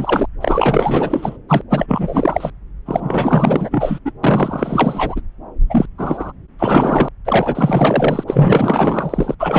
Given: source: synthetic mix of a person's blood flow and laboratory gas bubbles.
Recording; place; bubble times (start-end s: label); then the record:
Doppler ultrasound of blood flow; subclavian vein
0.00-0.26 s: bubbles
0.41-1.37 s: bubbles
1.49-1.64 s: bubbles
1.70-2.50 s: bubbles
2.85-3.99 s: bubbles
4.05-4.11 s: bubbles
4.23-5.21 s: bubbles
5.69-5.86 s: bubbles
5.98-6.32 s: bubbles
6.58-7.08 s: bubbles
7.25-8.24 s: bubbles
8.27-9.35 s: bubbles
9.39-9.59 s: bubbles
From the record:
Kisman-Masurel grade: 444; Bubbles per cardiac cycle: continuous sound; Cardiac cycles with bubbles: 100%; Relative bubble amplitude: maximal (0.775 to 0.999); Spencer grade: 4 (maximum detectable bubble signal sounding continuously throughout systole and diastole of every cardiac period, and overriding the amplitude of the normal cardiac signals); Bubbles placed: anywhere in the cardiac cycle